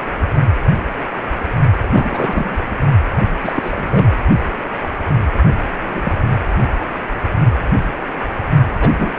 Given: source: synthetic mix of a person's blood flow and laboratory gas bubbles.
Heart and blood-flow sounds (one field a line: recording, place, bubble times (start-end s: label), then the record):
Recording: Doppler ultrasound of blood flow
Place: precordium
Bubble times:
1.89-2.56 s: bubbles
3.42-4.08 s: bubbles
5.83-6.13 s: bubbles
8.80-8.91 s: bubbles
8.98-9.11 s: bubbles
From the record:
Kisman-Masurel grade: 222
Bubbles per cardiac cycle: several, 3 to 8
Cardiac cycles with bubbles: 10 to 50%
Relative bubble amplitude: moderate (0.250 to 0.450)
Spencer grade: 2 (many but less than half of the cardiac periods contain bubble signals, singularly or in groups)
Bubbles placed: only in the low amplitude regions of the cardiac cycle